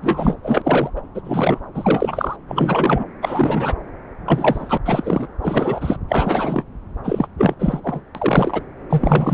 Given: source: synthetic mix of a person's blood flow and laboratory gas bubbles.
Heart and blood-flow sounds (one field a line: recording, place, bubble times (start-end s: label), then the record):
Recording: Doppler ultrasound of blood flow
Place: subclavian vein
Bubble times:
0.01-0.36 s: bubbles
0.42-0.90 s: bubbles
0.96-1.01 s: bubbles
1.14-1.21 s: bubbles
1.24-1.60 s: bubbles
1.74-2.36 s: bubbles
2.48-3.04 s: bubbles
3.21-3.75 s: bubbles
4.25-4.78 s: bubbles
4.85-5.27 s: bubbles
5.41-5.96 s: bubbles
6.08-6.64 s: bubbles
7.04-7.28 s: bubbles
7.38-7.55 s: bubbles
7.59-7.80 s: bubbles
7.83-8.01 s: bubbles
8.14-8.62 s: bubbles
8.89-9.34 s: bubbles
From the record:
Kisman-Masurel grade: 343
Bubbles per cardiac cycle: rolling drumbeat, 9 or more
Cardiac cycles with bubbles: 100%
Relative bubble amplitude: loud (0.450 to 0.775)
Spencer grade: 3 (all of the cardiac periods contain showers or single bubble signals, but not dominating or overriding the cardiac motion signals)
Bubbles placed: anywhere in the cardiac cycle